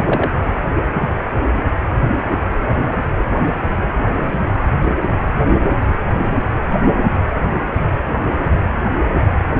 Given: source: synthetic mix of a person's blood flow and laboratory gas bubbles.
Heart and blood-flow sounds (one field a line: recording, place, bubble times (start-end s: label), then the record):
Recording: Doppler ultrasound of blood flow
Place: precordium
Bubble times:
0.00-0.29 s: bubbles
4.08-4.35 s: bubbles
4.79-4.95 s: bubbles
From the record:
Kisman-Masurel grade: 122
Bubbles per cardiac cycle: 1 to 2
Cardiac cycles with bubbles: 10 to 50%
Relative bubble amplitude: moderate (0.250 to 0.450)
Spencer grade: 2 (many but less than half of the cardiac periods contain bubble signals, singularly or in groups)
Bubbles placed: anywhere in the cardiac cycle